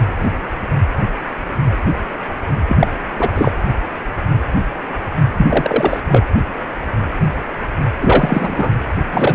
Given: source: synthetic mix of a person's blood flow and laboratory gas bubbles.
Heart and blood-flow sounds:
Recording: Doppler ultrasound of blood flow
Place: precordium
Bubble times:
2.68-2.87 s: bubbles
3.19-3.28 s: bubbles
3.34-3.51 s: bubbles
5.37-5.46 s: bubbles
5.50-6.02 s: bubbles
6.09-6.25 s: bubbles
8.00-8.70 s: bubbles
9.12-9.35 s: bubbles
From the record:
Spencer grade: 2 (many but less than half of the cardiac periods contain bubble signals, singularly or in groups)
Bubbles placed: anywhere in the cardiac cycle

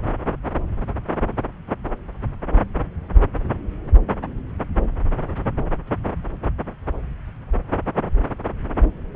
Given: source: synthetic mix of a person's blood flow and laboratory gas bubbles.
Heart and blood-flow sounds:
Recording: Doppler ultrasound of blood flow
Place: subclavian vein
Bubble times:
no bubbles
From the record:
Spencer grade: 0 (complete lack of bubble signals)

